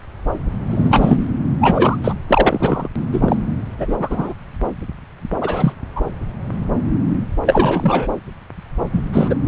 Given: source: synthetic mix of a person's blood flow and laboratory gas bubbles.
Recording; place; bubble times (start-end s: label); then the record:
Doppler ultrasound of blood flow; subclavian vein
0.69-1.25 s: bubbles
1.61-1.98 s: bubbles
2.04-2.14 s: bubbles
2.27-2.88 s: bubbles
3.12-3.36 s: bubbles
3.77-4.33 s: bubbles
5.41-5.72 s: bubbles
5.96-6.01 s: bubbles
7.46-8.08 s: bubbles
8.93-9.02 s: bubbles
9.12-9.35 s: bubbles
From the record:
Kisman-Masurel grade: 233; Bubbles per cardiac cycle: several, 3 to 8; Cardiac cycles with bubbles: 50 to 99%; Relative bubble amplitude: loud (0.450 to 0.775); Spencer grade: 3 (all of the cardiac periods contain showers or single bubble signals, but not dominating or overriding the cardiac motion signals); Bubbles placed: anywhere in the cardiac cycle